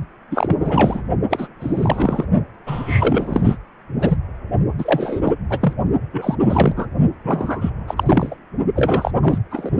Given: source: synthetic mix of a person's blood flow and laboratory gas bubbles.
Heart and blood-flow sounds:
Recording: Doppler ultrasound of blood flow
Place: precordium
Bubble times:
0.30-1.02 s: bubbles
1.30-1.47 s: bubbles
1.60-2.25 s: bubbles
2.67-3.57 s: bubbles
3.99-4.17 s: bubbles
4.78-5.21 s: bubbles
5.24-5.33 s: bubbles
5.50-5.74 s: bubbles
6.13-6.36 s: bubbles
6.40-6.74 s: bubbles
6.76-6.87 s: bubbles
7.24-7.71 s: bubbles
7.88-8.34 s: bubbles
8.75-9.11 s: bubbles
9.21-9.38 s: bubbles
9.50-9.71 s: bubbles
From the record:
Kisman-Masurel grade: 343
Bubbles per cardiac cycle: rolling drumbeat, 9 or more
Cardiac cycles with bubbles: 100%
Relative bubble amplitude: loud (0.450 to 0.775)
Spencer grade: 3 (all of the cardiac periods contain showers or single bubble signals, but not dominating or overriding the cardiac motion signals)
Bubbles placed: only in the low amplitude regions of the cardiac cycle

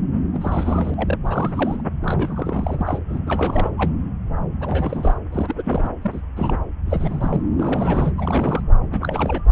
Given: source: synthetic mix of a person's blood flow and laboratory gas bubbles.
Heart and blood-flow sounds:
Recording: Doppler ultrasound of blood flow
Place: subclavian vein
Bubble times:
0.33-1.17 s: bubbles
1.25-1.83 s: bubbles
2.02-2.98 s: bubbles
3.09-3.20 s: bubbles
3.26-3.71 s: bubbles
3.77-3.92 s: bubbles
4.60-5.16 s: bubbles
5.32-5.90 s: bubbles
6.01-6.21 s: bubbles
6.36-6.57 s: bubbles
6.87-7.42 s: bubbles
7.58-8.12 s: bubbles
8.17-8.62 s: bubbles
8.92-9.42 s: bubbles
From the record:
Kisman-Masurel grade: 332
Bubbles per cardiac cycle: rolling drumbeat, 9 or more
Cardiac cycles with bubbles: 50 to 99%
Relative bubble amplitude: moderate (0.250 to 0.450)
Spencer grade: 3 (all of the cardiac periods contain showers or single bubble signals, but not dominating or overriding the cardiac motion signals)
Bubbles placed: anywhere in the cardiac cycle

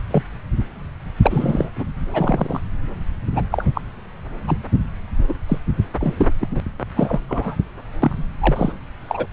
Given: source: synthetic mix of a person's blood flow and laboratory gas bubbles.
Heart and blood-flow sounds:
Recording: Doppler ultrasound of blood flow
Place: subclavian vein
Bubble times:
0.10-0.23 s: bubbles
1.22-1.70 s: bubbles
1.75-1.85 s: bubbles
2.07-2.61 s: bubbles
3.33-3.42 s: bubbles
3.51-3.65 s: bubbles
3.74-3.81 s: bubbles
4.47-4.58 s: bubbles
5.28-5.35 s: bubbles
5.48-5.58 s: bubbles
6.00-6.32 s: bubbles
6.40-6.48 s: bubbles
6.51-6.61 s: bubbles
6.96-7.20 s: bubbles
7.28-7.57 s: bubbles
8.02-8.26 s: bubbles
8.38-8.72 s: bubbles
9.08-9.26 s: bubbles
From the record:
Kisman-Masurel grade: 243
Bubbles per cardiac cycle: several, 3 to 8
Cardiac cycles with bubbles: 100%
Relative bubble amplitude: loud (0.450 to 0.775)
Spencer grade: 3 (all of the cardiac periods contain showers or single bubble signals, but not dominating or overriding the cardiac motion signals)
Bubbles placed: anywhere in the cardiac cycle

